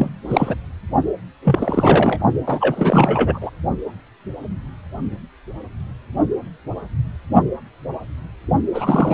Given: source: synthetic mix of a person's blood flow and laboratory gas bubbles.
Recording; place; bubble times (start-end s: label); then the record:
Doppler ultrasound of blood flow; precordium
0.00-0.10 s: bubbles
0.30-0.55 s: bubbles
1.44-2.20 s: bubbles
2.46-3.50 s: bubbles
8.74-9.14 s: bubbles
From the record:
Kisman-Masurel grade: 333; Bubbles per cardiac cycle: rolling drumbeat, 9 or more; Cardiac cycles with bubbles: 50 to 99%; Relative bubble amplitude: loud (0.450 to 0.775); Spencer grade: 3 (all of the cardiac periods contain showers or single bubble signals, but not dominating or overriding the cardiac motion signals); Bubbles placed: only in the low amplitude regions of the cardiac cycle